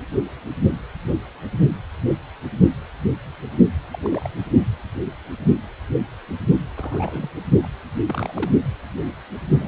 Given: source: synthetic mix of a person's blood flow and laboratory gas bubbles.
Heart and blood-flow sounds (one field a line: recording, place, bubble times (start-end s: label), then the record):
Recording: Doppler ultrasound of blood flow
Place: precordium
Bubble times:
3.91-3.99 s: bubbles
4.03-4.30 s: bubbles
6.76-7.30 s: bubbles
7.62-7.68 s: bubbles
8.09-8.32 s: bubbles
8.35-8.52 s: bubbles
9.60-9.68 s: bubbles
From the record:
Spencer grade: 2 (many but less than half of the cardiac periods contain bubble signals, singularly or in groups)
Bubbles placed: only in the low amplitude regions of the cardiac cycle